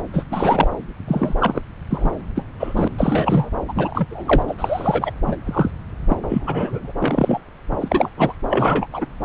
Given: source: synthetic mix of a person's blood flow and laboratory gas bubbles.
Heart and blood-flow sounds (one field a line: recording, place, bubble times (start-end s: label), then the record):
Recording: Doppler ultrasound of blood flow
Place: subclavian vein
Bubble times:
0.12-0.25 s: bubbles
0.30-0.70 s: bubbles
1.07-1.34 s: bubbles
1.40-1.61 s: bubbles
1.90-2.11 s: bubbles
2.35-2.44 s: bubbles
2.59-2.88 s: bubbles
2.98-3.51 s: bubbles
3.68-4.05 s: bubbles
4.10-4.43 s: bubbles
4.47-4.55 s: bubbles
4.58-5.10 s: bubbles
5.26-5.36 s: bubbles
5.45-5.71 s: bubbles
6.09-6.17 s: bubbles
6.29-6.92 s: bubbles
7.00-7.41 s: bubbles
7.80-8.09 s: bubbles
8.17-8.34 s: bubbles
8.50-8.87 s: bubbles
8.92-9.06 s: bubbles
From the record:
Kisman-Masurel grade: 243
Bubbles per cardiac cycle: several, 3 to 8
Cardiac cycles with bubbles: 100%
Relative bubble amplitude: loud (0.450 to 0.775)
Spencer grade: 3 (all of the cardiac periods contain showers or single bubble signals, but not dominating or overriding the cardiac motion signals)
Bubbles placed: anywhere in the cardiac cycle